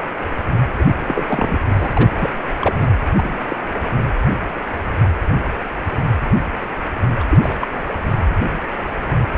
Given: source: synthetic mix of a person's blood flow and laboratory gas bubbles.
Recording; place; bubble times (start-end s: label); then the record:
Doppler ultrasound of blood flow; precordium
0.78-0.83 s: bubbles
1.08-1.24 s: bubbles
1.28-1.59 s: bubbles
1.68-1.89 s: bubbles
1.93-2.10 s: bubbles
2.17-2.30 s: bubbles
2.59-2.88 s: bubbles
3.15-3.36 s: bubbles
3.48-3.56 s: bubbles
7.20-7.23 s: bubbles
7.29-7.38 s: bubbles
7.42-7.56 s: bubbles
7.61-7.67 s: bubbles
From the record:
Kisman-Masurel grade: 222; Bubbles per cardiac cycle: several, 3 to 8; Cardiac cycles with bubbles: 10 to 50%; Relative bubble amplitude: moderate (0.250 to 0.450); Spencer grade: 2 (many but less than half of the cardiac periods contain bubble signals, singularly or in groups); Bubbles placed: anywhere in the cardiac cycle